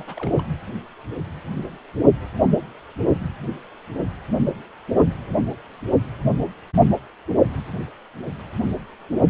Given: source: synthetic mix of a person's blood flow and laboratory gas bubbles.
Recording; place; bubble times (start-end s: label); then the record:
Doppler ultrasound of blood flow; precordium
0.00-0.03 s: bubbles
0.07-0.48 s: bubbles
From the record:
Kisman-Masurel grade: 211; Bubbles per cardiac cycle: several, 3 to 8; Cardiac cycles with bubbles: 1 to 10%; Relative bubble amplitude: barely perceptible (0.100 to 0.250); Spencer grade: 1 (occasional bubble signal discernible with the cardiac motion signal, with majority of cardiac periods free of bubbles); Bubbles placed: anywhere in the cardiac cycle